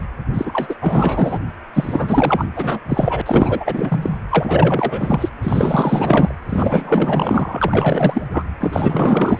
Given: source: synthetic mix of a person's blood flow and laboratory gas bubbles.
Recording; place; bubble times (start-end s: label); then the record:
Doppler ultrasound of blood flow; precordium
0.34-0.76 s: bubbles
0.81-1.38 s: bubbles
1.74-2.46 s: bubbles
2.55-2.79 s: bubbles
2.88-3.21 s: bubbles
3.25-4.17 s: bubbles
4.29-5.29 s: bubbles
5.42-6.34 s: bubbles
6.49-8.27 s: bubbles
8.32-8.43 s: bubbles
8.61-9.40 s: bubbles
From the record:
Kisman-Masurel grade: 444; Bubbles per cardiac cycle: continuous sound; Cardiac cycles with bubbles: 100%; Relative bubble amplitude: maximal (0.775 to 0.999); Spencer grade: 4 (maximum detectable bubble signal sounding continuously throughout systole and diastole of every cardiac period, and overriding the amplitude of the normal cardiac signals); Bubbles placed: anywhere in the cardiac cycle